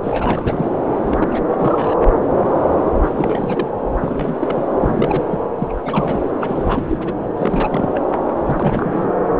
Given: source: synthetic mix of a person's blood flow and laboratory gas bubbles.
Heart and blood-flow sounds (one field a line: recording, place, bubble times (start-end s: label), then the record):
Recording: Doppler ultrasound of blood flow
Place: subclavian vein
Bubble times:
0.03-0.66 s: bubbles
1.01-1.42 s: bubbles
1.48-1.96 s: bubbles
3.02-3.10 s: bubbles
3.15-3.81 s: bubbles
4.01-4.64 s: bubbles
4.80-5.25 s: bubbles
5.29-5.39 s: bubbles
5.58-5.74 s: bubbles
5.84-6.25 s: bubbles
6.40-7.12 s: bubbles
7.36-8.00 s: bubbles
8.35-8.40 s: bubbles
8.45-9.10 s: bubbles
From the record:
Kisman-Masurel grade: 332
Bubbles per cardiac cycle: rolling drumbeat, 9 or more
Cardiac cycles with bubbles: 50 to 99%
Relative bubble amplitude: moderate (0.250 to 0.450)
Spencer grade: 3 (all of the cardiac periods contain showers or single bubble signals, but not dominating or overriding the cardiac motion signals)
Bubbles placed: anywhere in the cardiac cycle